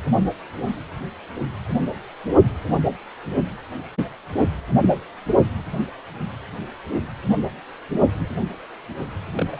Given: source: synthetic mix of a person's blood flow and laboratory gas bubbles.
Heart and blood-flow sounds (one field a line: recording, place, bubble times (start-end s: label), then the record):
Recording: Doppler ultrasound of blood flow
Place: precordium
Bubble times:
9.33-9.46 s: bubbles
9.52-9.60 s: bubbles
From the record:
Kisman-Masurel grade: 211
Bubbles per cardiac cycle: several, 3 to 8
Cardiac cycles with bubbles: 1 to 10%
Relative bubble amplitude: barely perceptible (0.100 to 0.250)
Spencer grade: 1 (occasional bubble signal discernible with the cardiac motion signal, with majority of cardiac periods free of bubbles)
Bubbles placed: only in the low amplitude regions of the cardiac cycle